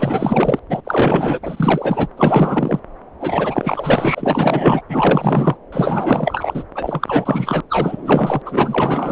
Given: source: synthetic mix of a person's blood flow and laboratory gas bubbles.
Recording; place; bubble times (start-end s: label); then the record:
Doppler ultrasound of blood flow; subclavian vein
0.00-0.59 s: bubbles
0.69-0.81 s: bubbles
0.84-1.40 s: bubbles
1.42-2.08 s: bubbles
2.17-2.79 s: bubbles
3.20-4.81 s: bubbles
4.88-5.56 s: bubbles
5.72-6.63 s: bubbles
6.74-7.61 s: bubbles
7.70-8.42 s: bubbles
8.46-9.12 s: bubbles
From the record:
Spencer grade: 4 (maximum detectable bubble signal sounding continuously throughout systole and diastole of every cardiac period, and overriding the amplitude of the normal cardiac signals); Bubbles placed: anywhere in the cardiac cycle